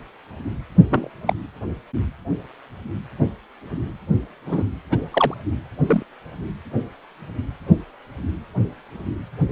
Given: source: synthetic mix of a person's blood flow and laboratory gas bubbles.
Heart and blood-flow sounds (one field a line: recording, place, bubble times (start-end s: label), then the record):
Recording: Doppler ultrasound of blood flow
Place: precordium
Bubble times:
0.89-1.09 s: bubbles
1.26-1.33 s: bubbles
4.46-4.64 s: bubbles
4.91-4.97 s: bubbles
5.11-5.34 s: bubbles
5.87-6.03 s: bubbles
From the record:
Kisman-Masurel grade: 122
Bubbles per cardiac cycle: 1 to 2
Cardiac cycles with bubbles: 10 to 50%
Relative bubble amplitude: moderate (0.250 to 0.450)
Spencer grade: 2 (many but less than half of the cardiac periods contain bubble signals, singularly or in groups)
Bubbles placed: anywhere in the cardiac cycle